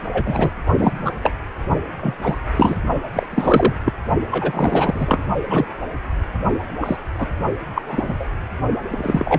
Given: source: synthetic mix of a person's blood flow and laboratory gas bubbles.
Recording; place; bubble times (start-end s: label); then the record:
Doppler ultrasound of blood flow; precordium
0.12-0.51 s: bubbles
0.78-1.12 s: bubbles
1.23-1.32 s: bubbles
2.00-2.15 s: bubbles
2.21-2.40 s: bubbles
2.56-2.77 s: bubbles
3.13-3.26 s: bubbles
3.31-3.73 s: bubbles
3.84-3.92 s: bubbles
4.30-5.24 s: bubbles
5.47-5.66 s: bubbles
6.81-6.97 s: bubbles
7.18-7.27 s: bubbles
7.75-7.82 s: bubbles
7.86-8.13 s: bubbles
8.20-8.25 s: bubbles
8.91-9.39 s: bubbles
From the record:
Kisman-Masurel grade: 243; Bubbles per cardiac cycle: several, 3 to 8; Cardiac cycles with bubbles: 100%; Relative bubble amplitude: loud (0.450 to 0.775); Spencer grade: 3 (all of the cardiac periods contain showers or single bubble signals, but not dominating or overriding the cardiac motion signals); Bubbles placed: only in the low amplitude regions of the cardiac cycle